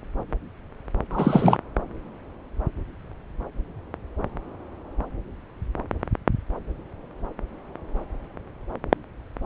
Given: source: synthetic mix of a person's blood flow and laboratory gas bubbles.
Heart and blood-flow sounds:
Doppler ultrasound of blood flow; subclavian vein
1.10-1.58 s: bubbles
From the record:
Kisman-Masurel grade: 213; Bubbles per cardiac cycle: several, 3 to 8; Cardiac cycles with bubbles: 1 to 10%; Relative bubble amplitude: loud (0.450 to 0.775); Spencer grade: 1 (occasional bubble signal discernible with the cardiac motion signal, with majority of cardiac periods free of bubbles); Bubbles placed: anywhere in the cardiac cycle

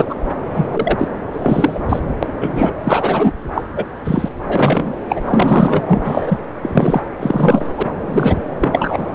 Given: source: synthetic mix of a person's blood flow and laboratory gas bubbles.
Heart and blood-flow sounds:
Doppler ultrasound of blood flow; subclavian vein
0.00-0.05 s: bubbles
0.09-0.14 s: bubbles
0.54-0.66 s: bubbles
0.72-1.08 s: bubbles
1.32-1.81 s: bubbles
1.89-2.00 s: bubbles
2.23-2.27 s: bubbles
2.41-2.72 s: bubbles
2.83-3.32 s: bubbles
3.53-3.62 s: bubbles
3.76-3.84 s: bubbles
4.04-4.30 s: bubbles
4.48-4.94 s: bubbles
5.09-5.22 s: bubbles
5.25-5.82 s: bubbles
5.88-6.38 s: bubbles
6.62-7.03 s: bubbles
7.19-7.67 s: bubbles
7.78-7.89 s: bubbles
8.06-8.35 s: bubbles
8.60-9.06 s: bubbles
From the record:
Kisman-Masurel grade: 243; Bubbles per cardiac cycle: several, 3 to 8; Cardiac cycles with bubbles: 100%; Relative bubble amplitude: loud (0.450 to 0.775); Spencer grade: 3 (all of the cardiac periods contain showers or single bubble signals, but not dominating or overriding the cardiac motion signals); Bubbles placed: anywhere in the cardiac cycle

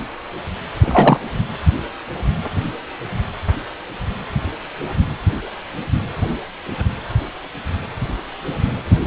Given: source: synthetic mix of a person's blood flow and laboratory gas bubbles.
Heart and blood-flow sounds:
Doppler ultrasound of blood flow; precordium
0.81-1.19 s: bubbles
From the record:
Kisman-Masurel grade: 213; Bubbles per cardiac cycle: several, 3 to 8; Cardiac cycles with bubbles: 1 to 10%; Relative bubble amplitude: loud (0.450 to 0.775); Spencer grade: 1 (occasional bubble signal discernible with the cardiac motion signal, with majority of cardiac periods free of bubbles); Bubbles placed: anywhere in the cardiac cycle

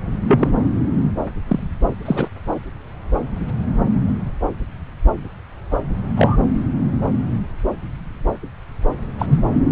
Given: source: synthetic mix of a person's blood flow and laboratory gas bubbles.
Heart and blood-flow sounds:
Doppler ultrasound of blood flow; subclavian vein
0.27-0.49 s: bubbles
1.48-1.60 s: bubbles
2.05-2.28 s: bubbles
5.71-5.78 s: bubbles
6.17-6.36 s: bubbles
9.18-9.39 s: bubbles
From the record:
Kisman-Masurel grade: 123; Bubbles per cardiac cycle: 1 to 2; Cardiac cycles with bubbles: 10 to 50%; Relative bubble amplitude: loud (0.450 to 0.775); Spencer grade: 2 (many but less than half of the cardiac periods contain bubble signals, singularly or in groups); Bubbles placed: anywhere in the cardiac cycle

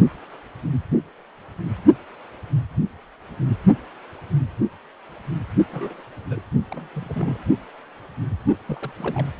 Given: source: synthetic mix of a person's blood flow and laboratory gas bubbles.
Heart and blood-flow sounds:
Doppler ultrasound of blood flow; precordium
5.71-6.02 s: bubbles
6.30-6.42 s: bubbles
6.71-6.88 s: bubbles
6.93-7.45 s: bubbles
8.66-8.91 s: bubbles
8.98-9.29 s: bubbles
From the record:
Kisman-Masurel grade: 221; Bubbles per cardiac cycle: several, 3 to 8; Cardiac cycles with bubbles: 10 to 50%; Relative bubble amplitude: barely perceptible (0.100 to 0.250); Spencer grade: 2 (many but less than half of the cardiac periods contain bubble signals, singularly or in groups); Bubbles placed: only in the low amplitude regions of the cardiac cycle

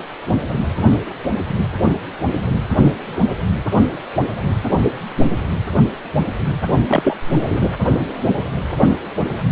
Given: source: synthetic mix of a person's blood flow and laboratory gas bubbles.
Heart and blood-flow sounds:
Doppler ultrasound of blood flow; precordium
6.88-7.17 s: bubbles
7.48-7.72 s: bubbles
From the record:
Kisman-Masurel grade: 213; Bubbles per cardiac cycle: several, 3 to 8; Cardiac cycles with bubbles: 1 to 10%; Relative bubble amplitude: loud (0.450 to 0.775); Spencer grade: 1 (occasional bubble signal discernible with the cardiac motion signal, with majority of cardiac periods free of bubbles); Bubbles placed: only in the low amplitude regions of the cardiac cycle

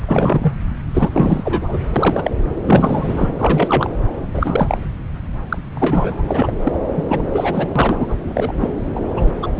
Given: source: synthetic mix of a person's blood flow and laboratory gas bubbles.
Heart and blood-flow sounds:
Doppler ultrasound of blood flow; subclavian vein
0.07-0.53 s: bubbles
0.94-1.78 s: bubbles
1.96-2.31 s: bubbles
2.64-3.32 s: bubbles
3.38-3.89 s: bubbles
4.33-4.78 s: bubbles
5.49-5.58 s: bubbles
5.75-6.23 s: bubbles
6.28-6.50 s: bubbles
6.63-6.72 s: bubbles
6.96-7.04 s: bubbles
7.08-7.21 s: bubbles
7.33-8.15 s: bubbles
8.24-8.53 s: bubbles
8.60-8.71 s: bubbles
8.96-9.01 s: bubbles
9.14-9.32 s: bubbles
9.42-9.49 s: bubbles
9.55-9.59 s: bubbles
From the record:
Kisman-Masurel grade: 343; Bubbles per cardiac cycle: rolling drumbeat, 9 or more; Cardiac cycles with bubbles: 100%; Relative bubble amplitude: loud (0.450 to 0.775); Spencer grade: 3 (all of the cardiac periods contain showers or single bubble signals, but not dominating or overriding the cardiac motion signals); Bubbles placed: anywhere in the cardiac cycle

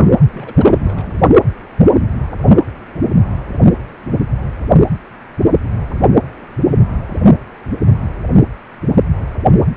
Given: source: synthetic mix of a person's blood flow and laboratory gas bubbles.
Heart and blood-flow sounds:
Doppler ultrasound of blood flow; precordium
0.32-1.20 s: bubbles
From the record:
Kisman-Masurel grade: 221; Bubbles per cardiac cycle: several, 3 to 8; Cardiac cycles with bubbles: 10 to 50%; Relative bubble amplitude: barely perceptible (0.100 to 0.250); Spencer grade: 2 (many but less than half of the cardiac periods contain bubble signals, singularly or in groups); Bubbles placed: only in the low amplitude regions of the cardiac cycle

